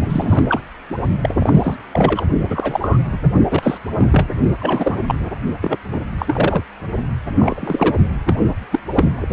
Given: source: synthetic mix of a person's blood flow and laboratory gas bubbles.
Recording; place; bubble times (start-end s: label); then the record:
Doppler ultrasound of blood flow; precordium
0.01-0.59 s: bubbles
1.23-1.37 s: bubbles
1.40-1.75 s: bubbles
1.93-2.23 s: bubbles
2.49-3.00 s: bubbles
3.11-3.19 s: bubbles
3.50-3.77 s: bubbles
3.97-4.26 s: bubbles
4.59-4.99 s: bubbles
5.07-5.20 s: bubbles
5.61-5.76 s: bubbles
5.92-6.00 s: bubbles
6.18-6.63 s: bubbles
7.38-7.95 s: bubbles
8.25-8.36 s: bubbles
8.71-8.79 s: bubbles
8.96-9.09 s: bubbles
9.15-9.28 s: bubbles
From the record:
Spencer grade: 3 (all of the cardiac periods contain showers or single bubble signals, but not dominating or overriding the cardiac motion signals); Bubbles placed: only in the low amplitude regions of the cardiac cycle